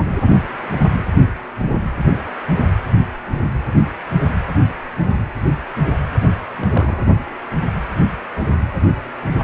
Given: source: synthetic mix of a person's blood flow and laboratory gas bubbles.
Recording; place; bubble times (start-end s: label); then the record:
Doppler ultrasound of blood flow; precordium
6.58-7.04 s: bubbles
From the record:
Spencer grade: 1 (occasional bubble signal discernible with the cardiac motion signal, with majority of cardiac periods free of bubbles); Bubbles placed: only in the low amplitude regions of the cardiac cycle